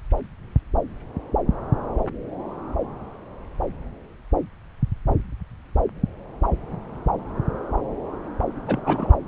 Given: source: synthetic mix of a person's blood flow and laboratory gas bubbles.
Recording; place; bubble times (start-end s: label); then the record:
Doppler ultrasound of blood flow; subclavian vein
8.67-9.14 s: bubbles
From the record:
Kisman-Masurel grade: 213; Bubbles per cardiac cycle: several, 3 to 8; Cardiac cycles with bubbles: 1 to 10%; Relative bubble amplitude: loud (0.450 to 0.775); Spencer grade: 1 (occasional bubble signal discernible with the cardiac motion signal, with majority of cardiac periods free of bubbles); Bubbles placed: anywhere in the cardiac cycle